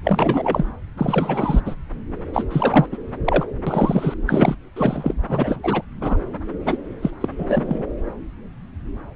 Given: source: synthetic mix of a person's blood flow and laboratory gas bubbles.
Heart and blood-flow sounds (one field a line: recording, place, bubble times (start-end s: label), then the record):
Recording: Doppler ultrasound of blood flow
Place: subclavian vein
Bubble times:
0.04-0.66 s: bubbles
0.97-1.61 s: bubbles
1.65-1.75 s: bubbles
2.33-2.44 s: bubbles
2.50-2.87 s: bubbles
2.92-2.98 s: bubbles
3.25-3.45 s: bubbles
3.67-4.15 s: bubbles
4.26-4.55 s: bubbles
4.76-5.14 s: bubbles
5.29-5.83 s: bubbles
6.00-6.17 s: bubbles
6.66-6.78 s: bubbles
7.01-7.11 s: bubbles
7.21-7.29 s: bubbles
7.38-7.86 s: bubbles
From the record:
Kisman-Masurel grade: 333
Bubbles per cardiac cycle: rolling drumbeat, 9 or more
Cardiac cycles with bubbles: 50 to 99%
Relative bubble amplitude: loud (0.450 to 0.775)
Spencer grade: 3 (all of the cardiac periods contain showers or single bubble signals, but not dominating or overriding the cardiac motion signals)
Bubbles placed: anywhere in the cardiac cycle